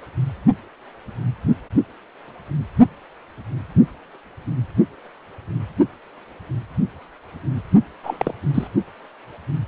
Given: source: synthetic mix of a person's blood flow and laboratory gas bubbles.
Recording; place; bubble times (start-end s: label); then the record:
Doppler ultrasound of blood flow; precordium
8.03-8.34 s: bubbles
8.54-8.67 s: bubbles
From the record:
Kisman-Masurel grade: 212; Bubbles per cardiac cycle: several, 3 to 8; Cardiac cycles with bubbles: 1 to 10%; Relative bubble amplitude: moderate (0.250 to 0.450); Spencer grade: 1 (occasional bubble signal discernible with the cardiac motion signal, with majority of cardiac periods free of bubbles); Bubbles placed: only in the low amplitude regions of the cardiac cycle